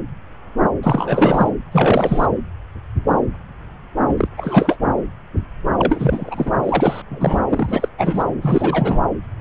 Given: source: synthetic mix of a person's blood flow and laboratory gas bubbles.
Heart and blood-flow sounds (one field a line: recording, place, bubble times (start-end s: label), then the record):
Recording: Doppler ultrasound of blood flow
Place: subclavian vein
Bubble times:
0.83-1.50 s: bubbles
1.72-2.26 s: bubbles
4.08-4.13 s: bubbles
4.17-4.28 s: bubbles
4.38-4.77 s: bubbles
4.81-4.88 s: bubbles
5.78-6.52 s: bubbles
6.63-7.02 s: bubbles
7.10-7.40 s: bubbles
7.49-7.88 s: bubbles
7.98-8.24 s: bubbles
8.41-9.00 s: bubbles
From the record:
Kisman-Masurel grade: 333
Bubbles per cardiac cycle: rolling drumbeat, 9 or more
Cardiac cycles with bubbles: 50 to 99%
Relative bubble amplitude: loud (0.450 to 0.775)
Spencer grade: 3 (all of the cardiac periods contain showers or single bubble signals, but not dominating or overriding the cardiac motion signals)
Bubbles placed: anywhere in the cardiac cycle